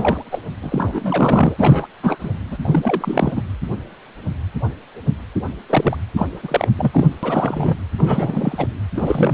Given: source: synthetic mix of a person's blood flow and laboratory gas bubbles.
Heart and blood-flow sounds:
Doppler ultrasound of blood flow; precordium
0.00-0.24 s: bubbles
0.32-0.39 s: bubbles
0.61-1.86 s: bubbles
2.03-2.30 s: bubbles
2.50-2.58 s: bubbles
2.62-3.32 s: bubbles
3.36-3.43 s: bubbles
5.69-5.97 s: bubbles
6.16-6.27 s: bubbles
6.43-6.68 s: bubbles
6.78-7.08 s: bubbles
7.22-7.77 s: bubbles
7.97-8.67 s: bubbles
8.95-9.34 s: bubbles
From the record:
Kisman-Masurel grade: 332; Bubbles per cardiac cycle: rolling drumbeat, 9 or more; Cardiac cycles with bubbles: 50 to 99%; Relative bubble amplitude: moderate (0.250 to 0.450); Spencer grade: 3 (all of the cardiac periods contain showers or single bubble signals, but not dominating or overriding the cardiac motion signals); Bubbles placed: anywhere in the cardiac cycle

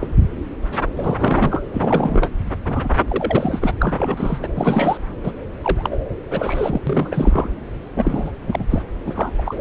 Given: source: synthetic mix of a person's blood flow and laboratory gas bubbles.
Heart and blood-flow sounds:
Doppler ultrasound of blood flow; subclavian vein
0.00-0.07 s: bubbles
0.96-1.62 s: bubbles
1.73-2.28 s: bubbles
2.65-2.88 s: bubbles
3.08-3.72 s: bubbles
3.79-4.38 s: bubbles
4.42-4.48 s: bubbles
4.55-4.98 s: bubbles
5.23-5.32 s: bubbles
5.62-5.96 s: bubbles
6.30-6.82 s: bubbles
6.87-7.49 s: bubbles
7.95-8.31 s: bubbles
8.42-8.64 s: bubbles
8.70-8.83 s: bubbles
9.05-9.31 s: bubbles
9.38-9.42 s: bubbles
9.46-9.61 s: bubbles
From the record:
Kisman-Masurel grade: 332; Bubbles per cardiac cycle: rolling drumbeat, 9 or more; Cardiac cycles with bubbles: 50 to 99%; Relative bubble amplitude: moderate (0.250 to 0.450); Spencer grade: 3 (all of the cardiac periods contain showers or single bubble signals, but not dominating or overriding the cardiac motion signals); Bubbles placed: anywhere in the cardiac cycle

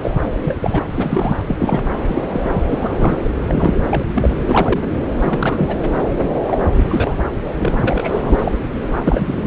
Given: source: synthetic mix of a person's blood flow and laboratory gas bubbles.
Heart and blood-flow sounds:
Doppler ultrasound of blood flow; subclavian vein
0.01-0.11 s: bubbles
0.36-0.85 s: bubbles
0.92-1.37 s: bubbles
1.46-1.89 s: bubbles
2.07-2.23 s: bubbles
2.30-2.61 s: bubbles
2.67-3.17 s: bubbles
3.48-3.74 s: bubbles
3.93-4.04 s: bubbles
4.15-4.40 s: bubbles
4.47-4.99 s: bubbles
5.20-5.77 s: bubbles
6.18-6.30 s: bubbles
6.43-6.58 s: bubbles
6.74-6.82 s: bubbles
6.90-7.17 s: bubbles
7.58-8.35 s: bubbles
8.38-8.60 s: bubbles
8.74-8.97 s: bubbles
9.04-9.47 s: bubbles
From the record:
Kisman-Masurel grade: 242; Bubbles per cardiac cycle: several, 3 to 8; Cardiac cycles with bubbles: 100%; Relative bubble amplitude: moderate (0.250 to 0.450); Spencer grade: 3 (all of the cardiac periods contain showers or single bubble signals, but not dominating or overriding the cardiac motion signals); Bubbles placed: anywhere in the cardiac cycle

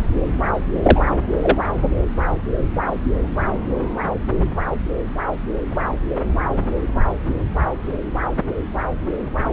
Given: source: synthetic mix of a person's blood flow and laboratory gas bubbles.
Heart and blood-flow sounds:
Doppler ultrasound of blood flow; subclavian vein
0.82-1.00 s: bubbles
1.43-1.58 s: bubbles
From the record:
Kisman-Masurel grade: 213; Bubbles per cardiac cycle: several, 3 to 8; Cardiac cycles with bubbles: 1 to 10%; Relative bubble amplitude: loud (0.450 to 0.775); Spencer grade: 1 (occasional bubble signal discernible with the cardiac motion signal, with majority of cardiac periods free of bubbles); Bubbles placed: anywhere in the cardiac cycle

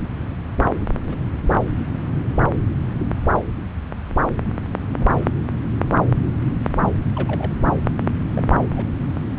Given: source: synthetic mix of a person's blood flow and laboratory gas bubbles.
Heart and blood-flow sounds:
Doppler ultrasound of blood flow; subclavian vein
1.07-1.17 s: bubbles
1.46-1.66 s: bubbles
5.00-5.07 s: bubbles
7.16-7.52 s: bubbles
8.35-8.51 s: bubbles
8.73-8.88 s: bubbles
From the record:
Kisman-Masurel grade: 121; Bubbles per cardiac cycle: 1 to 2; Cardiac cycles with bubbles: 10 to 50%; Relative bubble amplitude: barely perceptible (0.100 to 0.250); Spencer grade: 2 (many but less than half of the cardiac periods contain bubble signals, singularly or in groups); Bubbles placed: anywhere in the cardiac cycle

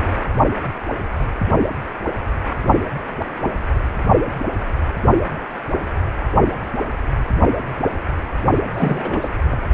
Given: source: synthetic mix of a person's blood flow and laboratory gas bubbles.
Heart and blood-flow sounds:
Doppler ultrasound of blood flow; precordium
8.70-9.29 s: bubbles
9.50-9.57 s: bubbles
From the record:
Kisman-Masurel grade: 212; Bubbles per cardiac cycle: several, 3 to 8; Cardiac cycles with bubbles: 1 to 10%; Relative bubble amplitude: moderate (0.250 to 0.450); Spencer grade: 1 (occasional bubble signal discernible with the cardiac motion signal, with majority of cardiac periods free of bubbles); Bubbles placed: only in the low amplitude regions of the cardiac cycle

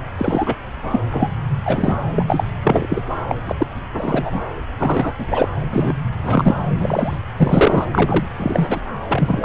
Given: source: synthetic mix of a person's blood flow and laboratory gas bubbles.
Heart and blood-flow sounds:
Doppler ultrasound of blood flow; subclavian vein
0.17-0.55 s: bubbles
0.92-1.01 s: bubbles
1.10-1.28 s: bubbles
1.64-1.97 s: bubbles
2.16-2.24 s: bubbles
2.27-2.44 s: bubbles
2.62-3.05 s: bubbles
3.28-3.36 s: bubbles
3.46-3.55 s: bubbles
3.58-3.67 s: bubbles
3.97-4.41 s: bubbles
4.79-5.12 s: bubbles
5.17-5.26 s: bubbles
5.30-5.48 s: bubbles
5.71-5.94 s: bubbles
6.23-6.55 s: bubbles
6.79-7.17 s: bubbles
7.37-7.86 s: bubbles
7.89-8.27 s: bubbles
8.37-8.88 s: bubbles
9.08-9.45 s: bubbles
From the record:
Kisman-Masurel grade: 233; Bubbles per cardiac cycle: several, 3 to 8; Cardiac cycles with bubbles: 50 to 99%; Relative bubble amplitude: loud (0.450 to 0.775); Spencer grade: 3 (all of the cardiac periods contain showers or single bubble signals, but not dominating or overriding the cardiac motion signals); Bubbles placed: anywhere in the cardiac cycle

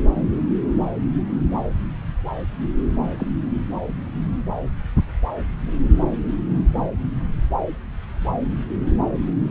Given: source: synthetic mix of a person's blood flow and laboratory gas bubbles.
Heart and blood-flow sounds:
Doppler ultrasound of blood flow; subclavian vein
3.19-3.26 s: bubbles
From the record:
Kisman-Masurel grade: 112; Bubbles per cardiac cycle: 1 to 2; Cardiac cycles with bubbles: 1 to 10%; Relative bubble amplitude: moderate (0.250 to 0.450); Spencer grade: 1 (occasional bubble signal discernible with the cardiac motion signal, with majority of cardiac periods free of bubbles); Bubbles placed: anywhere in the cardiac cycle

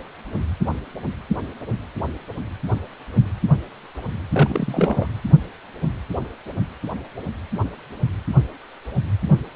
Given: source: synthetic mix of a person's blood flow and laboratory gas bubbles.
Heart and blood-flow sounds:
Doppler ultrasound of blood flow; precordium
4.33-5.08 s: bubbles
From the record:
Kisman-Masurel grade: 212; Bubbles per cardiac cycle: several, 3 to 8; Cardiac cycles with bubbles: 1 to 10%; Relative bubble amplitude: moderate (0.250 to 0.450); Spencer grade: 1 (occasional bubble signal discernible with the cardiac motion signal, with majority of cardiac periods free of bubbles); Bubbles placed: anywhere in the cardiac cycle

